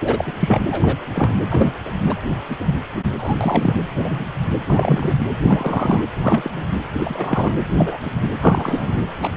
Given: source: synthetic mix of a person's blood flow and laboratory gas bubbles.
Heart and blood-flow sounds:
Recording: Doppler ultrasound of blood flow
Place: precordium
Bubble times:
0.00-0.59 s: bubbles
0.71-0.98 s: bubbles
1.12-1.36 s: bubbles
1.50-1.73 s: bubbles
1.85-1.91 s: bubbles
2.02-2.15 s: bubbles
2.49-2.75 s: bubbles
3.18-3.35 s: bubbles
3.40-3.74 s: bubbles
3.94-4.24 s: bubbles
4.67-5.15 s: bubbles
5.42-6.03 s: bubbles
6.21-6.50 s: bubbles
6.55-6.62 s: bubbles
6.99-7.56 s: bubbles
7.78-7.97 s: bubbles
8.01-8.11 s: bubbles
8.40-9.07 s: bubbles
9.21-9.30 s: bubbles
From the record:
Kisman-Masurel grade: 243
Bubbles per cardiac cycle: several, 3 to 8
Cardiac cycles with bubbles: 100%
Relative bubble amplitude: loud (0.450 to 0.775)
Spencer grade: 3 (all of the cardiac periods contain showers or single bubble signals, but not dominating or overriding the cardiac motion signals)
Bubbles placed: anywhere in the cardiac cycle

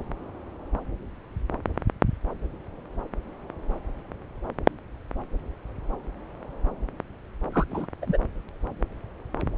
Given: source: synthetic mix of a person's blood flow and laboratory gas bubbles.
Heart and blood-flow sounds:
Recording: Doppler ultrasound of blood flow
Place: subclavian vein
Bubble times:
7.52-7.64 s: bubbles
7.70-7.87 s: bubbles
8.02-8.18 s: bubbles
From the record:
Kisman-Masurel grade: 212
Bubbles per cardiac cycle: several, 3 to 8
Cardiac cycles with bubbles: 1 to 10%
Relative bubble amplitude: moderate (0.250 to 0.450)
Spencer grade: 1 (occasional bubble signal discernible with the cardiac motion signal, with majority of cardiac periods free of bubbles)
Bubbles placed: anywhere in the cardiac cycle

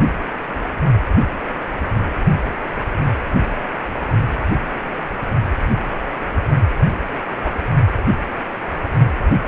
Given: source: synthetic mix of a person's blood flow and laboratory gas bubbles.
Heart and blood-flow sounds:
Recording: Doppler ultrasound of blood flow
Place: precordium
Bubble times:
7.44-7.51 s: bubbles
From the record:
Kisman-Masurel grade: 123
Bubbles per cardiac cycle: 1 to 2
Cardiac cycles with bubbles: 10 to 50%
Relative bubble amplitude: loud (0.450 to 0.775)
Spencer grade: 2 (many but less than half of the cardiac periods contain bubble signals, singularly or in groups)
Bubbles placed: anywhere in the cardiac cycle

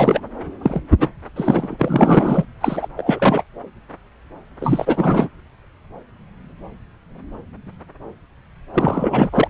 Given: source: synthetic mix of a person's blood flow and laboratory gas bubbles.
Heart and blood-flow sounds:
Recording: Doppler ultrasound of blood flow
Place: subclavian vein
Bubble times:
0.00-0.20 s: bubbles
0.63-0.81 s: bubbles
0.99-1.08 s: bubbles
1.36-1.74 s: bubbles
1.78-2.46 s: bubbles
2.61-2.88 s: bubbles
2.97-3.44 s: bubbles
4.60-5.29 s: bubbles
8.73-9.47 s: bubbles
From the record:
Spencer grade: 3 (all of the cardiac periods contain showers or single bubble signals, but not dominating or overriding the cardiac motion signals)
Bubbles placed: anywhere in the cardiac cycle

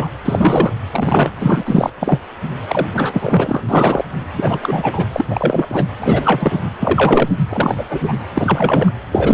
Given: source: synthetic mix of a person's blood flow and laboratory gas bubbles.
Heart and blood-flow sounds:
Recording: Doppler ultrasound of blood flow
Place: precordium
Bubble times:
0.00-0.08 s: bubbles
0.24-0.73 s: bubbles
0.91-1.31 s: bubbles
1.39-1.91 s: bubbles
2.00-2.20 s: bubbles
2.68-2.87 s: bubbles
2.94-3.62 s: bubbles
3.69-4.04 s: bubbles
4.36-5.05 s: bubbles
5.12-5.24 s: bubbles
5.30-5.85 s: bubbles
6.01-6.59 s: bubbles
6.82-7.29 s: bubbles
7.49-7.83 s: bubbles
7.89-8.00 s: bubbles
8.03-8.15 s: bubbles
8.34-8.91 s: bubbles
9.12-9.34 s: bubbles
From the record:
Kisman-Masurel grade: 343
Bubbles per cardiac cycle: rolling drumbeat, 9 or more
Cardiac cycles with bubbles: 100%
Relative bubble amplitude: loud (0.450 to 0.775)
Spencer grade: 3 (all of the cardiac periods contain showers or single bubble signals, but not dominating or overriding the cardiac motion signals)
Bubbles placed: anywhere in the cardiac cycle

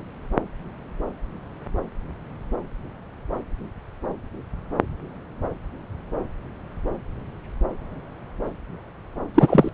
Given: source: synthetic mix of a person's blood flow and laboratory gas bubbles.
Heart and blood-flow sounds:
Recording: Doppler ultrasound of blood flow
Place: subclavian vein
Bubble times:
9.34-9.71 s: bubbles
From the record:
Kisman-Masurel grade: 213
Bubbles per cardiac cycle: several, 3 to 8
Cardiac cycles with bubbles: 1 to 10%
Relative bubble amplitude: loud (0.450 to 0.775)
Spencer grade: 1 (occasional bubble signal discernible with the cardiac motion signal, with majority of cardiac periods free of bubbles)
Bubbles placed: anywhere in the cardiac cycle

